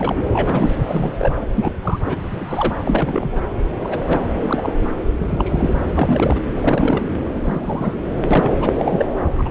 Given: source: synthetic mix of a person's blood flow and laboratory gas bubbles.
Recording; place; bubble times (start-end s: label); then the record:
Doppler ultrasound of blood flow; subclavian vein
0.00-0.23 s: bubbles
0.33-0.75 s: bubbles
0.88-1.32 s: bubbles
1.56-1.71 s: bubbles
1.82-2.00 s: bubbles
2.04-2.16 s: bubbles
2.28-2.76 s: bubbles
2.80-3.43 s: bubbles
3.83-4.00 s: bubbles
4.04-4.26 s: bubbles
4.40-4.72 s: bubbles
5.19-5.78 s: bubbles
5.91-6.40 s: bubbles
6.51-7.03 s: bubbles
7.35-7.99 s: bubbles
8.31-8.55 s: bubbles
8.60-8.72 s: bubbles
8.79-9.06 s: bubbles
9.38-9.49 s: bubbles
From the record:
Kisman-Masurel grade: 242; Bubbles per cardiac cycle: several, 3 to 8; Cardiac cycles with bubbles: 100%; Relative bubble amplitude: moderate (0.250 to 0.450); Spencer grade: 3 (all of the cardiac periods contain showers or single bubble signals, but not dominating or overriding the cardiac motion signals); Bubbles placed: anywhere in the cardiac cycle